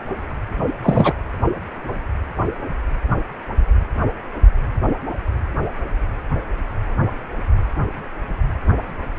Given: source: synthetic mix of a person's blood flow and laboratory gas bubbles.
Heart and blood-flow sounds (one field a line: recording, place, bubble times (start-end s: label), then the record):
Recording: Doppler ultrasound of blood flow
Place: precordium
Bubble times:
0.82-1.14 s: bubbles
From the record:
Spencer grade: 1 (occasional bubble signal discernible with the cardiac motion signal, with majority of cardiac periods free of bubbles)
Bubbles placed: anywhere in the cardiac cycle